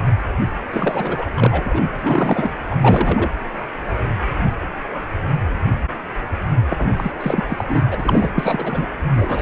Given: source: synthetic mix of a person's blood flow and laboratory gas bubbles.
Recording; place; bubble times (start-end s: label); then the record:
Doppler ultrasound of blood flow; precordium
0.70-1.27 s: bubbles
1.37-1.97 s: bubbles
2.01-2.51 s: bubbles
2.71-2.76 s: bubbles
2.81-3.30 s: bubbles
6.69-6.92 s: bubbles
6.97-7.12 s: bubbles
7.20-7.43 s: bubbles
7.49-7.54 s: bubbles
7.58-7.65 s: bubbles
7.68-7.82 s: bubbles
7.91-8.31 s: bubbles
8.38-8.86 s: bubbles
9.14-9.42 s: bubbles
From the record:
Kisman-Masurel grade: 333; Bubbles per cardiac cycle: rolling drumbeat, 9 or more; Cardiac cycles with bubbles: 50 to 99%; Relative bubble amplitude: loud (0.450 to 0.775); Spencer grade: 3 (all of the cardiac periods contain showers or single bubble signals, but not dominating or overriding the cardiac motion signals); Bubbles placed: anywhere in the cardiac cycle